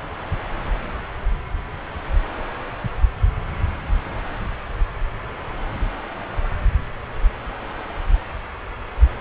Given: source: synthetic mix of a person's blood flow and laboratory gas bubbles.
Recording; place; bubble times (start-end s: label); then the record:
Doppler ultrasound of blood flow; subclavian vein
no bubbles
From the record:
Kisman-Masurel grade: 000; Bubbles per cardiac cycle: 0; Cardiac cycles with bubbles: 0%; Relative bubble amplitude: no bubbles discernible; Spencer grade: 0 (complete lack of bubble signals)